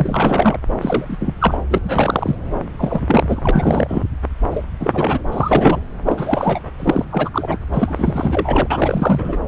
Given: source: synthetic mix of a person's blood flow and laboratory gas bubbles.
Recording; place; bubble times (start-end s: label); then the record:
Doppler ultrasound of blood flow; subclavian vein
0.00-0.58 s: bubbles
0.81-1.05 s: bubbles
1.09-1.17 s: bubbles
1.20-1.34 s: bubbles
1.40-1.58 s: bubbles
1.70-1.78 s: bubbles
1.83-2.36 s: bubbles
2.79-4.04 s: bubbles
4.50-4.64 s: bubbles
4.79-5.24 s: bubbles
5.32-5.79 s: bubbles
6.05-6.59 s: bubbles
6.79-7.05 s: bubbles
7.10-7.29 s: bubbles
7.33-7.58 s: bubbles
7.72-8.68 s: bubbles
8.70-9.38 s: bubbles
From the record:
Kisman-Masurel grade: 343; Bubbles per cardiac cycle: rolling drumbeat, 9 or more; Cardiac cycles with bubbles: 100%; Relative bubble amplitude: loud (0.450 to 0.775); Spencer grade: 3 (all of the cardiac periods contain showers or single bubble signals, but not dominating or overriding the cardiac motion signals); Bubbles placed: anywhere in the cardiac cycle